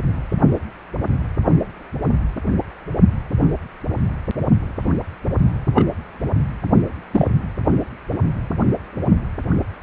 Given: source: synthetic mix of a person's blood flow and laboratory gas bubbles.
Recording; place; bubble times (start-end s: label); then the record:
Doppler ultrasound of blood flow; precordium
5.74-5.86 s: bubbles
7.12-7.31 s: bubbles
From the record:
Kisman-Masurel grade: 122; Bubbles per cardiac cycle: 1 to 2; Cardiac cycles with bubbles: 10 to 50%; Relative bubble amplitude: moderate (0.250 to 0.450); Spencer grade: 2 (many but less than half of the cardiac periods contain bubble signals, singularly or in groups); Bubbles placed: anywhere in the cardiac cycle